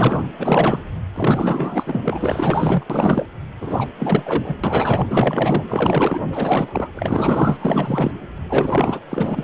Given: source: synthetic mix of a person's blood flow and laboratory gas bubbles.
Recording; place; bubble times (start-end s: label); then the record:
Doppler ultrasound of blood flow; precordium
0.00-0.23 s: bubbles
0.39-0.81 s: bubbles
1.16-2.00 s: bubbles
2.04-2.83 s: bubbles
2.89-3.26 s: bubbles
3.61-3.89 s: bubbles
3.99-4.55 s: bubbles
4.63-5.63 s: bubbles
5.68-6.20 s: bubbles
6.33-6.89 s: bubbles
6.95-7.56 s: bubbles
7.59-8.12 s: bubbles
8.49-9.00 s: bubbles
9.10-9.43 s: bubbles
From the record:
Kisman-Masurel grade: 444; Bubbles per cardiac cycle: continuous sound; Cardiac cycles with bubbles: 100%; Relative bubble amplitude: maximal (0.775 to 0.999); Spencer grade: 4 (maximum detectable bubble signal sounding continuously throughout systole and diastole of every cardiac period, and overriding the amplitude of the normal cardiac signals); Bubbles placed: anywhere in the cardiac cycle